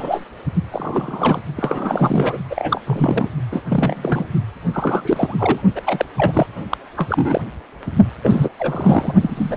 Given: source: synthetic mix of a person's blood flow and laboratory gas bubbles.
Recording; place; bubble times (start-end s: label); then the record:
Doppler ultrasound of blood flow; precordium
0.00-0.25 s: bubbles
0.71-1.40 s: bubbles
1.56-2.38 s: bubbles
2.50-2.81 s: bubbles
2.83-3.29 s: bubbles
3.52-3.63 s: bubbles
3.69-4.25 s: bubbles
4.73-5.35 s: bubbles
5.39-5.61 s: bubbles
5.75-5.81 s: bubbles
5.87-6.06 s: bubbles
6.17-6.46 s: bubbles
6.70-6.78 s: bubbles
6.96-7.41 s: bubbles
7.86-7.91 s: bubbles
8.22-8.49 s: bubbles
8.59-9.13 s: bubbles
9.21-9.57 s: bubbles
From the record:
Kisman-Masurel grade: 342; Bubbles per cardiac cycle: rolling drumbeat, 9 or more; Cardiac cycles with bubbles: 100%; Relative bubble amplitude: moderate (0.250 to 0.450); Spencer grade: 3 (all of the cardiac periods contain showers or single bubble signals, but not dominating or overriding the cardiac motion signals); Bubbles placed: only in the low amplitude regions of the cardiac cycle